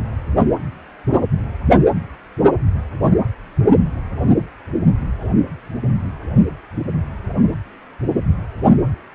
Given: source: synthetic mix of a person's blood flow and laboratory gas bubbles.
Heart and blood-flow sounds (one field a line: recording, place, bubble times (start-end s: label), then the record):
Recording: Doppler ultrasound of blood flow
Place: precordium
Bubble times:
5.21-5.25 s: bubbles
From the record:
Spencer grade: 1 (occasional bubble signal discernible with the cardiac motion signal, with majority of cardiac periods free of bubbles)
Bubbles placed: anywhere in the cardiac cycle